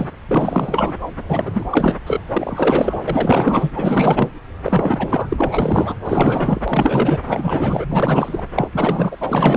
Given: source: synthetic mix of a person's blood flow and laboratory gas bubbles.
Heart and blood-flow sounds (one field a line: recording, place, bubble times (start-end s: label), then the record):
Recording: Doppler ultrasound of blood flow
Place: subclavian vein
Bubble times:
0.00-0.09 s: bubbles
0.28-0.94 s: bubbles
1.28-1.64 s: bubbles
1.71-1.97 s: bubbles
2.06-2.21 s: bubbles
2.33-2.98 s: bubbles
3.08-3.71 s: bubbles
3.75-4.33 s: bubbles
4.62-5.96 s: bubbles
6.04-6.62 s: bubbles
6.67-7.21 s: bubbles
7.28-7.86 s: bubbles
7.89-8.46 s: bubbles
8.54-8.68 s: bubbles
8.72-9.17 s: bubbles
9.21-9.57 s: bubbles
From the record:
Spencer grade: 4 (maximum detectable bubble signal sounding continuously throughout systole and diastole of every cardiac period, and overriding the amplitude of the normal cardiac signals)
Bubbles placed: anywhere in the cardiac cycle